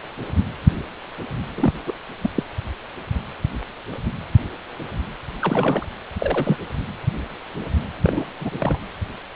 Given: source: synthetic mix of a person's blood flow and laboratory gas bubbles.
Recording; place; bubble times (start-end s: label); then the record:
Doppler ultrasound of blood flow; precordium
1.55-1.73 s: bubbles
1.86-1.94 s: bubbles
2.23-2.30 s: bubbles
2.34-2.44 s: bubbles
5.41-5.85 s: bubbles
6.18-6.57 s: bubbles
8.03-8.25 s: bubbles
8.40-8.51 s: bubbles
8.59-8.79 s: bubbles
From the record:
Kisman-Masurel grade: 222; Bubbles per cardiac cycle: several, 3 to 8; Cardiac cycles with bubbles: 10 to 50%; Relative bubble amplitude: moderate (0.250 to 0.450); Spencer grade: 2 (many but less than half of the cardiac periods contain bubble signals, singularly or in groups); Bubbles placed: anywhere in the cardiac cycle